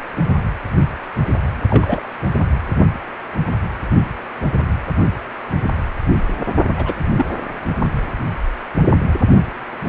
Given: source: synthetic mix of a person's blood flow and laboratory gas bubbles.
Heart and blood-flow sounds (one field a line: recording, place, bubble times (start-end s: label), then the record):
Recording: Doppler ultrasound of blood flow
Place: precordium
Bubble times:
1.70-2.03 s: bubbles
6.77-6.94 s: bubbles
7.17-7.25 s: bubbles
From the record:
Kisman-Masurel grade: 122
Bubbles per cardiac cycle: 1 to 2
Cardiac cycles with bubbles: 10 to 50%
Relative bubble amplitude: moderate (0.250 to 0.450)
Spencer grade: 2 (many but less than half of the cardiac periods contain bubble signals, singularly or in groups)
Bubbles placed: only in the low amplitude regions of the cardiac cycle